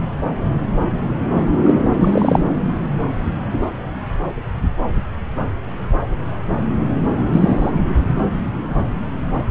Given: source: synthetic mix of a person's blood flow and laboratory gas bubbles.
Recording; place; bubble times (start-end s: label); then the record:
Doppler ultrasound of blood flow; subclavian vein
1.66-1.74 s: bubbles
2.01-2.42 s: bubbles
7.32-7.71 s: bubbles
From the record:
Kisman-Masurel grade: 113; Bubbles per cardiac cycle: 1 to 2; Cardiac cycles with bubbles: 1 to 10%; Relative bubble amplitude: loud (0.450 to 0.775); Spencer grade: 1 (occasional bubble signal discernible with the cardiac motion signal, with majority of cardiac periods free of bubbles); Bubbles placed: anywhere in the cardiac cycle